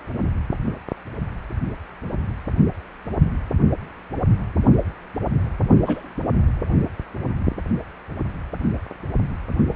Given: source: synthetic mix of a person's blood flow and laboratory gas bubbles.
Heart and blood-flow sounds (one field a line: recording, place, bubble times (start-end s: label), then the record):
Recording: Doppler ultrasound of blood flow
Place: precordium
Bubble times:
5.86-6.01 s: bubbles
From the record:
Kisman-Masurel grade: 111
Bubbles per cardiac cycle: 1 to 2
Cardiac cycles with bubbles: 1 to 10%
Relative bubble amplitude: barely perceptible (0.100 to 0.250)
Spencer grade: 1 (occasional bubble signal discernible with the cardiac motion signal, with majority of cardiac periods free of bubbles)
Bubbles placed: anywhere in the cardiac cycle